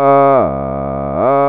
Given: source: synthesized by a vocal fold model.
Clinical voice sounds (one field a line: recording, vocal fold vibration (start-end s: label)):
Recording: sustained vowel that changes in the middle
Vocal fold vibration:
0.00-0.32 s: 138.8 Hz, open quotient 0.26
0.52-1.12 s: 68.4 Hz, open quotient 0.28
1.32-1.49 s: 138.8 Hz, open quotient 0.26